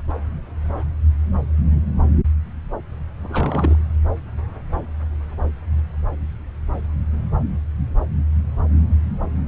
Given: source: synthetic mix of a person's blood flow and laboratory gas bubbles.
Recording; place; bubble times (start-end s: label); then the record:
Doppler ultrasound of blood flow; subclavian vein
3.23-3.75 s: bubbles
From the record:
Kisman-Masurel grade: 211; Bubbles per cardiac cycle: several, 3 to 8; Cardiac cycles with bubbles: 1 to 10%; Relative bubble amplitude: barely perceptible (0.100 to 0.250); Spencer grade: 1 (occasional bubble signal discernible with the cardiac motion signal, with majority of cardiac periods free of bubbles); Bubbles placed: anywhere in the cardiac cycle